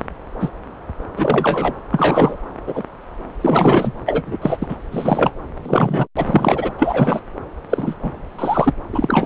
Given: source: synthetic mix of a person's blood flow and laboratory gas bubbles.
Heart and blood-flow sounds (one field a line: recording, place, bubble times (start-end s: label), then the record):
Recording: Doppler ultrasound of blood flow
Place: subclavian vein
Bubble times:
0.40-0.49 s: bubbles
1.17-1.73 s: bubbles
1.90-2.37 s: bubbles
2.67-2.83 s: bubbles
3.40-3.91 s: bubbles
4.06-4.23 s: bubbles
4.27-4.37 s: bubbles
4.42-4.58 s: bubbles
4.61-4.77 s: bubbles
4.91-5.32 s: bubbles
5.63-6.07 s: bubbles
6.17-6.72 s: bubbles
6.78-7.21 s: bubbles
7.70-7.95 s: bubbles
8.02-8.12 s: bubbles
8.38-8.74 s: bubbles
8.93-9.26 s: bubbles
From the record:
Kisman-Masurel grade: 243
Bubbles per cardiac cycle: several, 3 to 8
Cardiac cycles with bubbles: 100%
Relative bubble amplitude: loud (0.450 to 0.775)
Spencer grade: 3 (all of the cardiac periods contain showers or single bubble signals, but not dominating or overriding the cardiac motion signals)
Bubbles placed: anywhere in the cardiac cycle